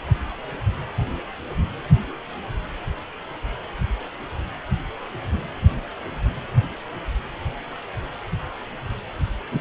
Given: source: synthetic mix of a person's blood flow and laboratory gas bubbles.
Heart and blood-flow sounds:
Doppler ultrasound of blood flow; precordium
9.51-9.61 s: bubbles
From the record:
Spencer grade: 1 (occasional bubble signal discernible with the cardiac motion signal, with majority of cardiac periods free of bubbles); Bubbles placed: anywhere in the cardiac cycle

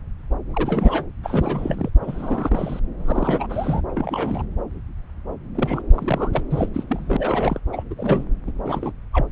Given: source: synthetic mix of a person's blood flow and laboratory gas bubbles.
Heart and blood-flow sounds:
Doppler ultrasound of blood flow; subclavian vein
0.53-1.05 s: bubbles
1.23-1.89 s: bubbles
2.02-2.80 s: bubbles
2.98-3.81 s: bubbles
3.90-4.43 s: bubbles
5.54-5.82 s: bubbles
5.94-6.42 s: bubbles
6.50-6.69 s: bubbles
6.73-6.84 s: bubbles
6.89-7.59 s: bubbles
7.72-7.83 s: bubbles
7.90-7.95 s: bubbles
7.97-8.25 s: bubbles
8.47-8.52 s: bubbles
8.64-8.92 s: bubbles
9.12-9.27 s: bubbles
From the record:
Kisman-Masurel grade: 332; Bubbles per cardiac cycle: rolling drumbeat, 9 or more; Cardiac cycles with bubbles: 50 to 99%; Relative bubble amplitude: moderate (0.250 to 0.450); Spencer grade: 3 (all of the cardiac periods contain showers or single bubble signals, but not dominating or overriding the cardiac motion signals); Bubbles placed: anywhere in the cardiac cycle

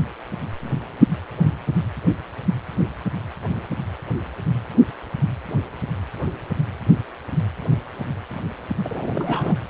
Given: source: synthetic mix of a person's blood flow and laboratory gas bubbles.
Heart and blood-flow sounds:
Doppler ultrasound of blood flow; precordium
8.85-9.68 s: bubbles
From the record:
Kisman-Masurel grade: 212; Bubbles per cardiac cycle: several, 3 to 8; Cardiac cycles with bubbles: 1 to 10%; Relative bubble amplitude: moderate (0.250 to 0.450); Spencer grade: 1 (occasional bubble signal discernible with the cardiac motion signal, with majority of cardiac periods free of bubbles); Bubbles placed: anywhere in the cardiac cycle

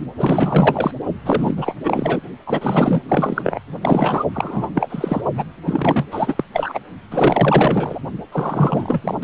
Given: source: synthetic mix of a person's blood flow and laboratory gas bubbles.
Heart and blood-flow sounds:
Doppler ultrasound of blood flow; precordium
0.17-0.91 s: bubbles
1.25-1.75 s: bubbles
1.83-2.21 s: bubbles
2.46-3.01 s: bubbles
3.08-3.59 s: bubbles
3.81-4.25 s: bubbles
4.33-4.71 s: bubbles
4.74-5.22 s: bubbles
5.35-5.44 s: bubbles
5.65-6.06 s: bubbles
6.11-6.44 s: bubbles
6.53-6.79 s: bubbles
7.11-8.00 s: bubbles
8.31-9.14 s: bubbles
9.22-9.24 s: bubbles
From the record:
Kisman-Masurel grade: 444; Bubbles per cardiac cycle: continuous sound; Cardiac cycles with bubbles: 100%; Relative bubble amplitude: maximal (0.775 to 0.999); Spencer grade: 4 (maximum detectable bubble signal sounding continuously throughout systole and diastole of every cardiac period, and overriding the amplitude of the normal cardiac signals); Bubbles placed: only in the low amplitude regions of the cardiac cycle

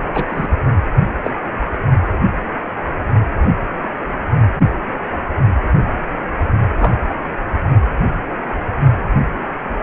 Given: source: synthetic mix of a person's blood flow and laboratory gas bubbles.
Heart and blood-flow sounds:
Doppler ultrasound of blood flow; precordium
0.14-0.24 s: bubbles
0.30-0.48 s: bubbles
1.23-1.30 s: bubbles
6.79-6.94 s: bubbles
From the record:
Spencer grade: 2 (many but less than half of the cardiac periods contain bubble signals, singularly or in groups); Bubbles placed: only in the low amplitude regions of the cardiac cycle

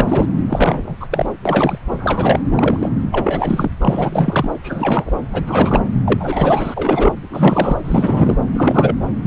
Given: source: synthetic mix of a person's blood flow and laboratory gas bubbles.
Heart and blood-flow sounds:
Doppler ultrasound of blood flow; subclavian vein
0.00-0.26 s: bubbles
0.47-0.96 s: bubbles
1.00-1.07 s: bubbles
1.11-1.26 s: bubbles
1.45-1.78 s: bubbles
1.91-2.40 s: bubbles
2.50-2.90 s: bubbles
3.12-3.71 s: bubbles
3.80-4.50 s: bubbles
4.63-5.12 s: bubbles
5.32-5.44 s: bubbles
5.47-5.81 s: bubbles
6.05-7.13 s: bubbles
7.30-7.82 s: bubbles
7.84-8.37 s: bubbles
8.53-8.96 s: bubbles
9.23-9.27 s: bubbles
From the record:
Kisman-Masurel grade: 343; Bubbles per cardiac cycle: rolling drumbeat, 9 or more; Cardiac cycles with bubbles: 100%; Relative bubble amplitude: loud (0.450 to 0.775); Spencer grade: 3 (all of the cardiac periods contain showers or single bubble signals, but not dominating or overriding the cardiac motion signals); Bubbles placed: anywhere in the cardiac cycle

